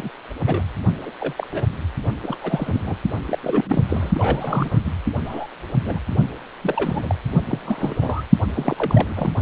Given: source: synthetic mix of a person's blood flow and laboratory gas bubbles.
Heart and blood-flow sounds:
Doppler ultrasound of blood flow; precordium
0.00-0.09 s: bubbles
0.46-0.62 s: bubbles
1.02-1.11 s: bubbles
1.20-1.33 s: bubbles
1.36-1.47 s: bubbles
1.51-1.66 s: bubbles
2.21-2.36 s: bubbles
2.42-2.95 s: bubbles
3.25-3.82 s: bubbles
3.88-4.79 s: bubbles
4.85-4.93 s: bubbles
5.25-5.47 s: bubbles
5.85-5.99 s: bubbles
6.62-7.15 s: bubbles
7.46-7.59 s: bubbles
7.65-7.96 s: bubbles
8.01-8.23 s: bubbles
8.54-9.31 s: bubbles
From the record:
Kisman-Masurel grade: 242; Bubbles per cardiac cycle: several, 3 to 8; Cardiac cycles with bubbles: 100%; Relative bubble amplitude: moderate (0.250 to 0.450); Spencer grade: 3 (all of the cardiac periods contain showers or single bubble signals, but not dominating or overriding the cardiac motion signals); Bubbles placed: only in the low amplitude regions of the cardiac cycle

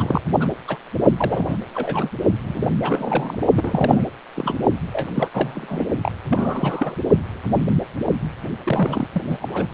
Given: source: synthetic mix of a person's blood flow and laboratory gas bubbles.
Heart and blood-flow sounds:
Doppler ultrasound of blood flow; precordium
0.00-0.21 s: bubbles
0.40-0.48 s: bubbles
0.68-0.77 s: bubbles
1.17-1.58 s: bubbles
1.74-2.10 s: bubbles
2.44-2.69 s: bubbles
2.81-3.48 s: bubbles
3.56-4.04 s: bubbles
4.34-4.58 s: bubbles
4.92-5.09 s: bubbles
5.15-5.29 s: bubbles
5.33-5.86 s: bubbles
6.03-6.11 s: bubbles
6.30-6.95 s: bubbles
8.65-9.08 s: bubbles
9.12-9.22 s: bubbles
9.26-9.38 s: bubbles
9.41-9.66 s: bubbles
From the record:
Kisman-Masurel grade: 332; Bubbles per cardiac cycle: rolling drumbeat, 9 or more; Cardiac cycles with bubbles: 50 to 99%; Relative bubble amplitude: moderate (0.250 to 0.450); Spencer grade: 3 (all of the cardiac periods contain showers or single bubble signals, but not dominating or overriding the cardiac motion signals); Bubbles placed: only in the low amplitude regions of the cardiac cycle

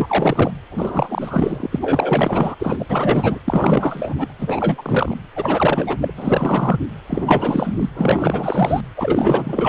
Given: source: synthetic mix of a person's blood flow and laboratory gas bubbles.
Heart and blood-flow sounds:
Doppler ultrasound of blood flow; precordium
0.00-0.51 s: bubbles
0.71-1.68 s: bubbles
1.71-2.54 s: bubbles
2.59-2.86 s: bubbles
2.89-3.39 s: bubbles
3.44-4.33 s: bubbles
4.39-5.17 s: bubbles
5.35-5.97 s: bubbles
6.01-6.13 s: bubbles
6.17-6.78 s: bubbles
7.06-7.90 s: bubbles
7.95-8.80 s: bubbles
8.96-9.69 s: bubbles
From the record:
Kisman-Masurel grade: 444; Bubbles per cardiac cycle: continuous sound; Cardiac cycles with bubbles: 100%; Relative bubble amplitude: maximal (0.775 to 0.999); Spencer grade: 4 (maximum detectable bubble signal sounding continuously throughout systole and diastole of every cardiac period, and overriding the amplitude of the normal cardiac signals); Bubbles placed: anywhere in the cardiac cycle

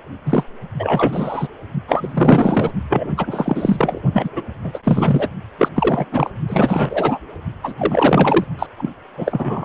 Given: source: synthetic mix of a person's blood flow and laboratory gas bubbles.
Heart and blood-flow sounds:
Doppler ultrasound of blood flow; precordium
0.26-0.44 s: bubbles
0.79-1.48 s: bubbles
1.88-2.71 s: bubbles
2.89-3.12 s: bubbles
3.17-4.01 s: bubbles
4.13-4.29 s: bubbles
4.36-4.42 s: bubbles
4.63-4.79 s: bubbles
4.83-5.29 s: bubbles
5.58-5.68 s: bubbles
5.75-6.05 s: bubbles
6.11-6.30 s: bubbles
6.48-7.18 s: bubbles
7.63-7.73 s: bubbles
7.77-8.44 s: bubbles
8.59-8.67 s: bubbles
8.77-8.90 s: bubbles
9.17-9.65 s: bubbles
From the record:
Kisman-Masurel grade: 343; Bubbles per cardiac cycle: rolling drumbeat, 9 or more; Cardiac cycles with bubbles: 100%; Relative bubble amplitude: loud (0.450 to 0.775); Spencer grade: 3 (all of the cardiac periods contain showers or single bubble signals, but not dominating or overriding the cardiac motion signals); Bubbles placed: only in the low amplitude regions of the cardiac cycle

